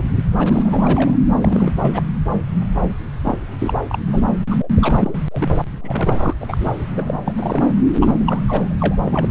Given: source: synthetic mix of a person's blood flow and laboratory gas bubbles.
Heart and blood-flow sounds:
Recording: Doppler ultrasound of blood flow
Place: subclavian vein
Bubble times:
0.00-0.03 s: bubbles
0.38-1.18 s: bubbles
1.41-1.72 s: bubbles
1.82-2.03 s: bubbles
2.82-2.95 s: bubbles
3.24-3.38 s: bubbles
3.59-3.81 s: bubbles
3.89-3.99 s: bubbles
4.07-4.21 s: bubbles
4.50-4.69 s: bubbles
4.75-5.15 s: bubbles
5.31-5.49 s: bubbles
5.81-6.34 s: bubbles
6.41-6.84 s: bubbles
6.96-7.21 s: bubbles
7.25-7.63 s: bubbles
8.00-8.44 s: bubbles
8.47-8.74 s: bubbles
8.77-9.02 s: bubbles
9.05-9.27 s: bubbles
From the record:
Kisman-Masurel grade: 342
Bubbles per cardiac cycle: rolling drumbeat, 9 or more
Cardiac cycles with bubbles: 100%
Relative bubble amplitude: moderate (0.250 to 0.450)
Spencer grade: 3 (all of the cardiac periods contain showers or single bubble signals, but not dominating or overriding the cardiac motion signals)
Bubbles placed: anywhere in the cardiac cycle

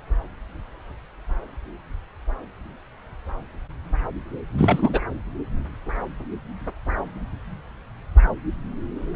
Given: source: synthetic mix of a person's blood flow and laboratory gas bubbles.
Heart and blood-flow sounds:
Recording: Doppler ultrasound of blood flow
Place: subclavian vein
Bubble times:
4.57-5.01 s: bubbles
From the record:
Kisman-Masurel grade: 222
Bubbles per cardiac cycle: several, 3 to 8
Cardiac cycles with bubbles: 10 to 50%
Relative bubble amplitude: moderate (0.250 to 0.450)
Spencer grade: 2 (many but less than half of the cardiac periods contain bubble signals, singularly or in groups)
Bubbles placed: anywhere in the cardiac cycle

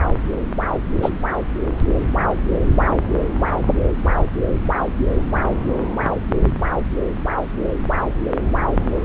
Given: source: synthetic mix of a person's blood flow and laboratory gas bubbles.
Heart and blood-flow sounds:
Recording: Doppler ultrasound of blood flow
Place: subclavian vein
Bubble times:
1.02-1.11 s: bubbles
From the record:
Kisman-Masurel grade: 113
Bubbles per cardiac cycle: 1 to 2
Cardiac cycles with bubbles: 1 to 10%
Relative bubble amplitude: loud (0.450 to 0.775)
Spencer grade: 1 (occasional bubble signal discernible with the cardiac motion signal, with majority of cardiac periods free of bubbles)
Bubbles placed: anywhere in the cardiac cycle

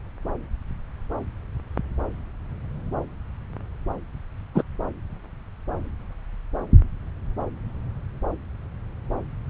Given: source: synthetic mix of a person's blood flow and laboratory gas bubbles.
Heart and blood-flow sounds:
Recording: Doppler ultrasound of blood flow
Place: subclavian vein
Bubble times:
4.54-4.62 s: bubbles
From the record:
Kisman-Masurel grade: 123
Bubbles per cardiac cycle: 1 to 2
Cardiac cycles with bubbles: 10 to 50%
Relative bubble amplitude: loud (0.450 to 0.775)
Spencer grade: 2 (many but less than half of the cardiac periods contain bubble signals, singularly or in groups)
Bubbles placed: anywhere in the cardiac cycle

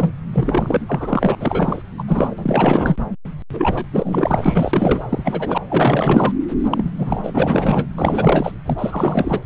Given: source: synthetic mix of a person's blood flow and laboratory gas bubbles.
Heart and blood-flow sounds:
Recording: Doppler ultrasound of blood flow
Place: subclavian vein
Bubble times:
0.00-0.12 s: bubbles
0.33-1.35 s: bubbles
1.40-1.82 s: bubbles
1.98-2.03 s: bubbles
2.08-2.35 s: bubbles
2.38-2.96 s: bubbles
3.53-3.85 s: bubbles
3.92-5.06 s: bubbles
5.09-5.58 s: bubbles
5.69-6.33 s: bubbles
6.70-6.90 s: bubbles
6.98-7.86 s: bubbles
7.98-8.52 s: bubbles
8.63-9.41 s: bubbles
From the record:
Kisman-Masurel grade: 444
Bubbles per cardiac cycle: continuous sound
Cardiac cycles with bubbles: 100%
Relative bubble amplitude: maximal (0.775 to 0.999)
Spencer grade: 4 (maximum detectable bubble signal sounding continuously throughout systole and diastole of every cardiac period, and overriding the amplitude of the normal cardiac signals)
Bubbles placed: anywhere in the cardiac cycle

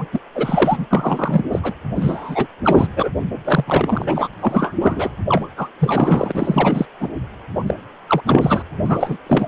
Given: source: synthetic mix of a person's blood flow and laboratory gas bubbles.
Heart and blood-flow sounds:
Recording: Doppler ultrasound of blood flow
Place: precordium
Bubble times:
0.00-0.05 s: bubbles
0.12-0.21 s: bubbles
0.35-0.87 s: bubbles
0.91-1.42 s: bubbles
1.51-1.59 s: bubbles
1.62-1.73 s: bubbles
1.96-2.47 s: bubbles
2.64-2.88 s: bubbles
2.96-3.09 s: bubbles
3.45-4.29 s: bubbles
4.40-4.73 s: bubbles
4.80-5.09 s: bubbles
5.28-5.49 s: bubbles
5.57-5.69 s: bubbles
5.79-6.86 s: bubbles
7.00-7.09 s: bubbles
7.55-7.64 s: bubbles
7.67-7.74 s: bubbles
8.07-8.21 s: bubbles
8.26-8.62 s: bubbles
8.85-9.17 s: bubbles
9.27-9.47 s: bubbles
From the record:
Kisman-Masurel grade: 343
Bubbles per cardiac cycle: rolling drumbeat, 9 or more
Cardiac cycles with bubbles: 100%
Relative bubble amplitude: loud (0.450 to 0.775)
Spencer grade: 3 (all of the cardiac periods contain showers or single bubble signals, but not dominating or overriding the cardiac motion signals)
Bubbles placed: anywhere in the cardiac cycle

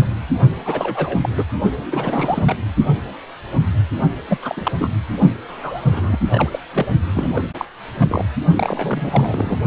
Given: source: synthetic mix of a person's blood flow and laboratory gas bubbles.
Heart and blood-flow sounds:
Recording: Doppler ultrasound of blood flow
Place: precordium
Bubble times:
0.00-0.05 s: bubbles
0.65-1.29 s: bubbles
1.36-1.45 s: bubbles
1.78-2.57 s: bubbles
4.28-4.38 s: bubbles
4.42-4.71 s: bubbles
4.79-4.89 s: bubbles
5.48-6.18 s: bubbles
6.30-6.59 s: bubbles
6.72-6.87 s: bubbles
7.14-7.43 s: bubbles
7.58-7.65 s: bubbles
7.97-8.25 s: bubbles
8.54-9.57 s: bubbles
From the record:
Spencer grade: 3 (all of the cardiac periods contain showers or single bubble signals, but not dominating or overriding the cardiac motion signals)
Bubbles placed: only in the low amplitude regions of the cardiac cycle

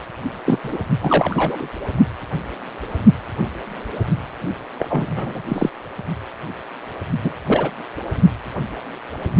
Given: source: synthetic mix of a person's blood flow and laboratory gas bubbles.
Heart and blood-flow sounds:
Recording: Doppler ultrasound of blood flow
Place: precordium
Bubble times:
0.46-0.58 s: bubbles
0.64-0.78 s: bubbles
1.02-1.69 s: bubbles
4.78-5.42 s: bubbles
5.48-5.69 s: bubbles
7.23-7.33 s: bubbles
7.47-7.70 s: bubbles
From the record:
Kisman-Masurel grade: 233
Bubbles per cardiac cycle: several, 3 to 8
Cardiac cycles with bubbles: 50 to 99%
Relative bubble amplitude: loud (0.450 to 0.775)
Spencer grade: 3 (all of the cardiac periods contain showers or single bubble signals, but not dominating or overriding the cardiac motion signals)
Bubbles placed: only in the low amplitude regions of the cardiac cycle

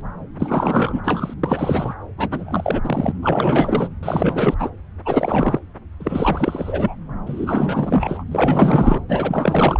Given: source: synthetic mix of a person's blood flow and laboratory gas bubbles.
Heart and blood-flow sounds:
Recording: Doppler ultrasound of blood flow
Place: subclavian vein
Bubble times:
0.39-1.01 s: bubbles
1.04-1.34 s: bubbles
1.43-1.95 s: bubbles
2.17-2.81 s: bubbles
2.83-3.12 s: bubbles
3.22-3.90 s: bubbles
4.02-4.54 s: bubbles
4.58-4.70 s: bubbles
5.05-5.59 s: bubbles
6.00-6.96 s: bubbles
7.25-8.24 s: bubbles
8.31-9.01 s: bubbles
9.08-9.80 s: bubbles
From the record:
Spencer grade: 4 (maximum detectable bubble signal sounding continuously throughout systole and diastole of every cardiac period, and overriding the amplitude of the normal cardiac signals)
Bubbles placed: anywhere in the cardiac cycle

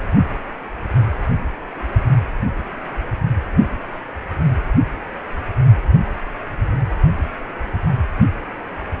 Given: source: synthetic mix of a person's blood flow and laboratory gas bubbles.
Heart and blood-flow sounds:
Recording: Doppler ultrasound of blood flow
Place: precordium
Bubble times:
no bubbles
From the record:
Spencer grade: 0 (complete lack of bubble signals)

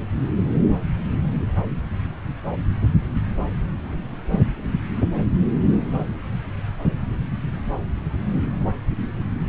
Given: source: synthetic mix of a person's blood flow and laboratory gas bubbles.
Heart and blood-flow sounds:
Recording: Doppler ultrasound of blood flow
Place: subclavian vein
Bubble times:
no bubbles
From the record:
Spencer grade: 0 (complete lack of bubble signals)

